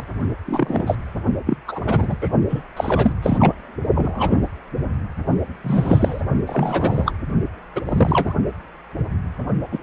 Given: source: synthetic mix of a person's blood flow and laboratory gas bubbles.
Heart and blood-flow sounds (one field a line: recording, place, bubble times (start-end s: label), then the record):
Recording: Doppler ultrasound of blood flow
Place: precordium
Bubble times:
0.00-0.04 s: bubbles
0.46-0.95 s: bubbles
1.46-1.57 s: bubbles
1.67-2.16 s: bubbles
2.21-2.29 s: bubbles
2.49-2.64 s: bubbles
2.77-3.12 s: bubbles
3.22-3.54 s: bubbles
3.94-4.42 s: bubbles
5.63-6.22 s: bubbles
6.46-7.12 s: bubbles
7.75-7.82 s: bubbles
7.85-8.33 s: bubbles
9.72-9.79 s: bubbles
From the record:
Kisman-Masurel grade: 233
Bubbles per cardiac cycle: several, 3 to 8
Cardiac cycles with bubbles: 50 to 99%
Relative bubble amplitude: loud (0.450 to 0.775)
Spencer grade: 3 (all of the cardiac periods contain showers or single bubble signals, but not dominating or overriding the cardiac motion signals)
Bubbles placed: only in the low amplitude regions of the cardiac cycle